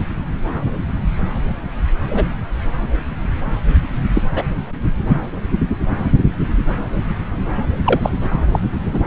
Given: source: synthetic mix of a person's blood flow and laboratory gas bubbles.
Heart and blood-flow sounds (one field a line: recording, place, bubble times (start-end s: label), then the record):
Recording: Doppler ultrasound of blood flow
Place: subclavian vein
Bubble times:
2.09-2.25 s: bubbles
4.13-4.22 s: bubbles
4.34-4.47 s: bubbles
7.85-8.10 s: bubbles
8.52-8.59 s: bubbles
8.86-8.99 s: bubbles
From the record:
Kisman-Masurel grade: 123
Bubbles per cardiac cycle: 1 to 2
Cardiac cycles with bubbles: 10 to 50%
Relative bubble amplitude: loud (0.450 to 0.775)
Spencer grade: 2 (many but less than half of the cardiac periods contain bubble signals, singularly or in groups)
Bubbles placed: anywhere in the cardiac cycle